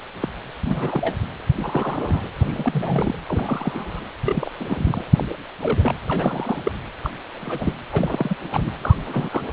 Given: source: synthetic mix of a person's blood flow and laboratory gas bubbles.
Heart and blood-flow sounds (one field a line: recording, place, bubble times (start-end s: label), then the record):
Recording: Doppler ultrasound of blood flow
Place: precordium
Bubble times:
0.21-0.29 s: bubbles
0.65-1.15 s: bubbles
1.56-2.28 s: bubbles
2.38-3.15 s: bubbles
3.27-4.04 s: bubbles
4.25-4.52 s: bubbles
4.59-5.04 s: bubbles
5.16-5.25 s: bubbles
5.62-5.94 s: bubbles
6.07-6.72 s: bubbles
7.03-7.11 s: bubbles
7.34-7.76 s: bubbles
7.92-8.35 s: bubbles
8.52-8.77 s: bubbles
8.81-8.96 s: bubbles
9.06-9.41 s: bubbles
From the record:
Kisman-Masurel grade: 242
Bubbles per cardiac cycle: several, 3 to 8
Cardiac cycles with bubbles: 100%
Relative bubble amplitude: moderate (0.250 to 0.450)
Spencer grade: 3 (all of the cardiac periods contain showers or single bubble signals, but not dominating or overriding the cardiac motion signals)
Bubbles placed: anywhere in the cardiac cycle